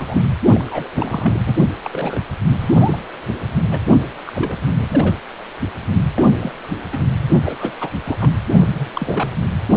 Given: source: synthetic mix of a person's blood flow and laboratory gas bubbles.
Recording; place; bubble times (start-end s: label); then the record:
Doppler ultrasound of blood flow; precordium
0.00-0.27 s: bubbles
0.50-0.89 s: bubbles
0.94-1.42 s: bubbles
1.46-1.55 s: bubbles
1.84-2.20 s: bubbles
2.58-3.04 s: bubbles
3.71-3.79 s: bubbles
4.26-4.60 s: bubbles
4.78-5.19 s: bubbles
6.16-6.25 s: bubbles
6.39-6.52 s: bubbles
6.92-6.98 s: bubbles
7.44-7.89 s: bubbles
8.05-8.18 s: bubbles
8.20-8.31 s: bubbles
8.60-8.67 s: bubbles
8.75-8.90 s: bubbles
8.94-9.29 s: bubbles
9.68-9.77 s: bubbles
From the record:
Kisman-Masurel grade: 242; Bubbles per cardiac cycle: several, 3 to 8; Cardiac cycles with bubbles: 100%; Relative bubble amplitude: moderate (0.250 to 0.450); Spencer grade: 3 (all of the cardiac periods contain showers or single bubble signals, but not dominating or overriding the cardiac motion signals); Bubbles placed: anywhere in the cardiac cycle